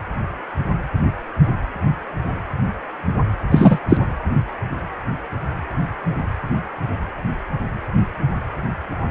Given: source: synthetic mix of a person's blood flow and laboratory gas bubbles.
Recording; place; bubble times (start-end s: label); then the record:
Doppler ultrasound of blood flow; precordium
3.51-3.79 s: bubbles
3.89-3.97 s: bubbles
From the record:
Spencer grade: 1 (occasional bubble signal discernible with the cardiac motion signal, with majority of cardiac periods free of bubbles); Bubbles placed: anywhere in the cardiac cycle